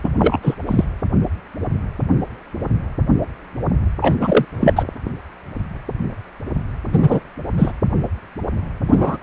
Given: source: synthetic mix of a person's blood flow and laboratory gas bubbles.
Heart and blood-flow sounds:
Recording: Doppler ultrasound of blood flow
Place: precordium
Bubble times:
0.03-0.09 s: bubbles
0.18-0.54 s: bubbles
0.67-0.84 s: bubbles
4.01-4.16 s: bubbles
4.21-4.45 s: bubbles
4.59-4.84 s: bubbles
6.92-7.20 s: bubbles
7.57-7.73 s: bubbles
8.88-9.17 s: bubbles
From the record:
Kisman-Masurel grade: 223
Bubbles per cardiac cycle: several, 3 to 8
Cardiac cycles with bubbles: 10 to 50%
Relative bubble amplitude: loud (0.450 to 0.775)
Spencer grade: 2 (many but less than half of the cardiac periods contain bubble signals, singularly or in groups)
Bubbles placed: anywhere in the cardiac cycle

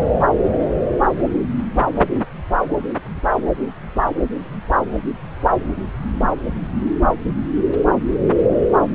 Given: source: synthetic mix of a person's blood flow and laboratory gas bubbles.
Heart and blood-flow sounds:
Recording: Doppler ultrasound of blood flow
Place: subclavian vein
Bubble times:
no bubbles
From the record:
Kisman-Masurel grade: 000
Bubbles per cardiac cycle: 0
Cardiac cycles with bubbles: 0%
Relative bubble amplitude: no bubbles discernible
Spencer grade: 0 (complete lack of bubble signals)

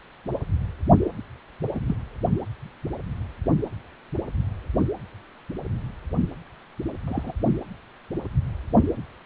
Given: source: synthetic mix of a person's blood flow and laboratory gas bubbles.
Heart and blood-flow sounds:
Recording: Doppler ultrasound of blood flow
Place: precordium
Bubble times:
1.74-1.80 s: bubbles
1.87-1.96 s: bubbles
7.07-7.33 s: bubbles
From the record:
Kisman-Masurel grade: 121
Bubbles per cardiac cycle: 1 to 2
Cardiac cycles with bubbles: 10 to 50%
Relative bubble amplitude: barely perceptible (0.100 to 0.250)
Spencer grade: 2 (many but less than half of the cardiac periods contain bubble signals, singularly or in groups)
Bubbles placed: only in the low amplitude regions of the cardiac cycle

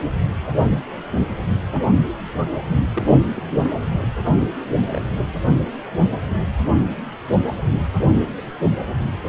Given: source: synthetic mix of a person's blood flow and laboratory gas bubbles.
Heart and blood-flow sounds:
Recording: Doppler ultrasound of blood flow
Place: precordium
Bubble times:
2.94-3.20 s: bubbles
3.35-3.69 s: bubbles
4.25-4.33 s: bubbles
4.73-5.02 s: bubbles
From the record:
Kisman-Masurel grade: 121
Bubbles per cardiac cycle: 1 to 2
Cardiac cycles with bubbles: 10 to 50%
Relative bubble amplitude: barely perceptible (0.100 to 0.250)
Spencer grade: 2 (many but less than half of the cardiac periods contain bubble signals, singularly or in groups)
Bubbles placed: anywhere in the cardiac cycle

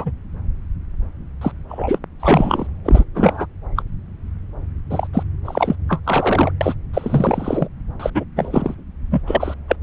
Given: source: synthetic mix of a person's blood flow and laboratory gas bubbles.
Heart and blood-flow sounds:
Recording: Doppler ultrasound of blood flow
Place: subclavian vein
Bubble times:
0.00-0.12 s: bubbles
1.41-1.51 s: bubbles
1.69-1.99 s: bubbles
2.20-2.67 s: bubbles
2.85-3.05 s: bubbles
3.15-3.46 s: bubbles
3.76-3.83 s: bubbles
4.90-5.07 s: bubbles
5.13-5.23 s: bubbles
5.45-5.75 s: bubbles
5.88-6.00 s: bubbles
6.04-6.52 s: bubbles
6.61-6.75 s: bubbles
6.93-7.68 s: bubbles
8.00-8.10 s: bubbles
8.14-8.24 s: bubbles
8.36-8.75 s: bubbles
9.11-9.22 s: bubbles
9.27-9.54 s: bubbles
9.68-9.76 s: bubbles
From the record:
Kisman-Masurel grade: 343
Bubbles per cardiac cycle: rolling drumbeat, 9 or more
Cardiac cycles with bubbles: 100%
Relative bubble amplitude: loud (0.450 to 0.775)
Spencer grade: 3 (all of the cardiac periods contain showers or single bubble signals, but not dominating or overriding the cardiac motion signals)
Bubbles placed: anywhere in the cardiac cycle

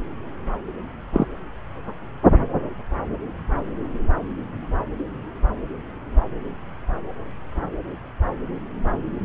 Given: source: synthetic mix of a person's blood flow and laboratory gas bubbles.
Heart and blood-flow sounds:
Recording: Doppler ultrasound of blood flow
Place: subclavian vein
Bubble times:
1.12-1.26 s: bubbles
From the record:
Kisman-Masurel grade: 113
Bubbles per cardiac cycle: 1 to 2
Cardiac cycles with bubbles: 1 to 10%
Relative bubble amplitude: loud (0.450 to 0.775)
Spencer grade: 1 (occasional bubble signal discernible with the cardiac motion signal, with majority of cardiac periods free of bubbles)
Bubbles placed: anywhere in the cardiac cycle

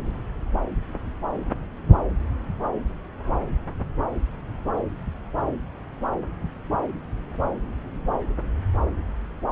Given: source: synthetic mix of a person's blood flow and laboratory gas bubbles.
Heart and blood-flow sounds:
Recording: Doppler ultrasound of blood flow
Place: subclavian vein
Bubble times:
no bubbles
From the record:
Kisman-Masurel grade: 000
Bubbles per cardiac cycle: 0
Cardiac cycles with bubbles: 0%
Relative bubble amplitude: no bubbles discernible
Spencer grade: 0 (complete lack of bubble signals)

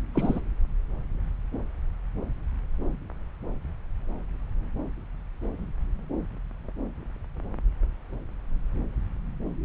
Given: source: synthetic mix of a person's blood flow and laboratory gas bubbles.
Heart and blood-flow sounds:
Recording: Doppler ultrasound of blood flow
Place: subclavian vein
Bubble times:
0.14-0.40 s: bubbles
From the record:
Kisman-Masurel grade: 112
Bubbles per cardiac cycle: 1 to 2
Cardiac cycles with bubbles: 1 to 10%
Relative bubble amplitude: moderate (0.250 to 0.450)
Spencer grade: 1 (occasional bubble signal discernible with the cardiac motion signal, with majority of cardiac periods free of bubbles)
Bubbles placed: anywhere in the cardiac cycle

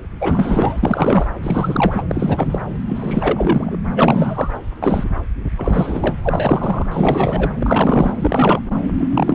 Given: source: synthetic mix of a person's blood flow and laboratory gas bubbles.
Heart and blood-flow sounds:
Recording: Doppler ultrasound of blood flow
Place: subclavian vein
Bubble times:
0.20-1.27 s: bubbles
1.43-2.04 s: bubbles
2.08-2.58 s: bubbles
2.88-3.77 s: bubbles
3.96-4.52 s: bubbles
4.83-5.04 s: bubbles
5.57-6.17 s: bubbles
6.22-6.86 s: bubbles
6.91-7.51 s: bubbles
7.58-8.12 s: bubbles
8.19-8.60 s: bubbles
8.99-9.35 s: bubbles
From the record:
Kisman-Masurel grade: 343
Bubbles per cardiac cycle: rolling drumbeat, 9 or more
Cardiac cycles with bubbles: 100%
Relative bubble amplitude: loud (0.450 to 0.775)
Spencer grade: 3 (all of the cardiac periods contain showers or single bubble signals, but not dominating or overriding the cardiac motion signals)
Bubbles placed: anywhere in the cardiac cycle

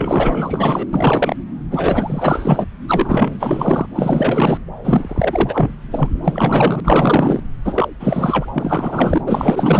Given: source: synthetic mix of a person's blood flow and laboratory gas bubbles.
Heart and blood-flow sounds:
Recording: Doppler ultrasound of blood flow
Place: subclavian vein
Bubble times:
0.00-0.86 s: bubbles
0.93-1.36 s: bubbles
1.71-2.65 s: bubbles
2.88-3.86 s: bubbles
3.95-4.57 s: bubbles
4.83-5.74 s: bubbles
5.91-6.17 s: bubbles
6.23-6.80 s: bubbles
6.84-7.41 s: bubbles
7.65-7.88 s: bubbles
8.00-8.46 s: bubbles
8.53-9.21 s: bubbles
9.27-9.80 s: bubbles
From the record:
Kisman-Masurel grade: 444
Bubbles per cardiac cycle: continuous sound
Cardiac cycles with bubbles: 100%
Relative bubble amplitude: maximal (0.775 to 0.999)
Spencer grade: 4 (maximum detectable bubble signal sounding continuously throughout systole and diastole of every cardiac period, and overriding the amplitude of the normal cardiac signals)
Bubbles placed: anywhere in the cardiac cycle

